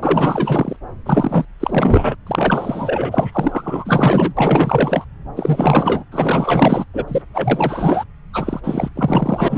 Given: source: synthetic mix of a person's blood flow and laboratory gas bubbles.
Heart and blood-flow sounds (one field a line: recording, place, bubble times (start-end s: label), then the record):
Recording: Doppler ultrasound of blood flow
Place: subclavian vein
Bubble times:
0.03-0.77 s: bubbles
1.05-1.45 s: bubbles
1.59-2.16 s: bubbles
2.27-4.33 s: bubbles
4.37-5.04 s: bubbles
5.36-6.04 s: bubbles
6.11-6.84 s: bubbles
6.93-7.04 s: bubbles
7.07-7.22 s: bubbles
7.31-8.04 s: bubbles
8.33-8.60 s: bubbles
8.63-8.89 s: bubbles
8.96-9.58 s: bubbles
From the record:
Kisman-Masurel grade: 444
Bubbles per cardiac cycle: continuous sound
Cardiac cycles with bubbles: 100%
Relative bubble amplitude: maximal (0.775 to 0.999)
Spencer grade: 4 (maximum detectable bubble signal sounding continuously throughout systole and diastole of every cardiac period, and overriding the amplitude of the normal cardiac signals)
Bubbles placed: anywhere in the cardiac cycle